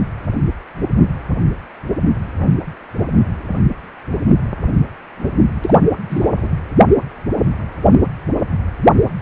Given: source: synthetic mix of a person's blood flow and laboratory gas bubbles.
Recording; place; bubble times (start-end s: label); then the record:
Doppler ultrasound of blood flow; precordium
5.61-5.78 s: bubbles
6.10-6.29 s: bubbles
6.36-6.53 s: bubbles
From the record:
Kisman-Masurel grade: 213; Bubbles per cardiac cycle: several, 3 to 8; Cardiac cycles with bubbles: 1 to 10%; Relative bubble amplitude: loud (0.450 to 0.775); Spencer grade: 1 (occasional bubble signal discernible with the cardiac motion signal, with majority of cardiac periods free of bubbles); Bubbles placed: anywhere in the cardiac cycle